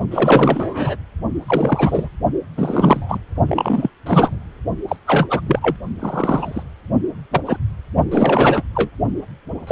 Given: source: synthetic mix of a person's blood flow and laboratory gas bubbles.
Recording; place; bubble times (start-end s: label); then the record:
Doppler ultrasound of blood flow; precordium
0.10-0.96 s: bubbles
1.46-2.08 s: bubbles
2.57-3.19 s: bubbles
3.46-3.91 s: bubbles
4.06-4.40 s: bubbles
4.88-4.96 s: bubbles
5.05-5.27 s: bubbles
5.30-5.41 s: bubbles
5.46-5.76 s: bubbles
6.00-6.63 s: bubbles
7.31-7.41 s: bubbles
7.46-7.57 s: bubbles
8.11-8.63 s: bubbles
8.75-8.89 s: bubbles
9.67-9.72 s: bubbles
From the record:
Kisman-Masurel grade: 243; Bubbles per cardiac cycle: several, 3 to 8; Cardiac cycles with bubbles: 100%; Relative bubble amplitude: loud (0.450 to 0.775); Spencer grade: 3 (all of the cardiac periods contain showers or single bubble signals, but not dominating or overriding the cardiac motion signals); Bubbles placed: only in the low amplitude regions of the cardiac cycle